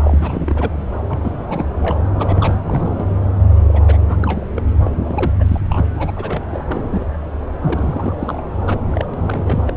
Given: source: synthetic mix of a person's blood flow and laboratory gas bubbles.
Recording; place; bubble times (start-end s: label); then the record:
Doppler ultrasound of blood flow; subclavian vein
0.04-0.80 s: bubbles
1.09-1.70 s: bubbles
1.81-1.99 s: bubbles
2.18-2.55 s: bubbles
2.62-3.10 s: bubbles
3.67-3.82 s: bubbles
3.86-3.98 s: bubbles
4.08-4.17 s: bubbles
4.22-4.47 s: bubbles
4.54-4.62 s: bubbles
4.83-4.91 s: bubbles
5.08-5.31 s: bubbles
5.39-5.85 s: bubbles
5.96-6.11 s: bubbles
6.16-6.43 s: bubbles
6.50-7.06 s: bubbles
7.65-8.14 s: bubbles
8.20-8.42 s: bubbles
8.67-8.84 s: bubbles
8.89-9.05 s: bubbles
9.13-9.63 s: bubbles
9.66-9.72 s: bubbles
From the record:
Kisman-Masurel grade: 342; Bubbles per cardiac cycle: rolling drumbeat, 9 or more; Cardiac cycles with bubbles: 100%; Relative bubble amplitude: moderate (0.250 to 0.450); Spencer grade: 3 (all of the cardiac periods contain showers or single bubble signals, but not dominating or overriding the cardiac motion signals); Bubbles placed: anywhere in the cardiac cycle